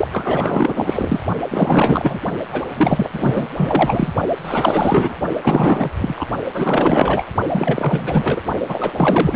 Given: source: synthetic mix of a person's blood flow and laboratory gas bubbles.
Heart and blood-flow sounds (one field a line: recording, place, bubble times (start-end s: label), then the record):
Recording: Doppler ultrasound of blood flow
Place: precordium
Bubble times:
0.00-0.08 s: bubbles
0.11-1.21 s: bubbles
1.50-2.20 s: bubbles
2.53-2.63 s: bubbles
2.75-3.10 s: bubbles
3.12-3.49 s: bubbles
3.56-4.14 s: bubbles
4.45-5.14 s: bubbles
5.42-5.90 s: bubbles
5.98-6.27 s: bubbles
6.54-7.23 s: bubbles
7.53-8.42 s: bubbles
8.67-8.92 s: bubbles
8.97-9.36 s: bubbles
From the record:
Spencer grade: 4 (maximum detectable bubble signal sounding continuously throughout systole and diastole of every cardiac period, and overriding the amplitude of the normal cardiac signals)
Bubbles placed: only in the low amplitude regions of the cardiac cycle